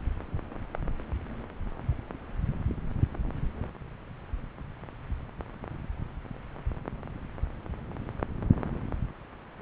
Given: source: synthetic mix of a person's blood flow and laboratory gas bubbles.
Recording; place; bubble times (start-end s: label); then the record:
Doppler ultrasound of blood flow; subclavian vein
no bubbles
From the record:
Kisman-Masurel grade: 000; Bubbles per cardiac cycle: 0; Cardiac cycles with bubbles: 0%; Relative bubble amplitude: no bubbles discernible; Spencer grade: 0 (complete lack of bubble signals)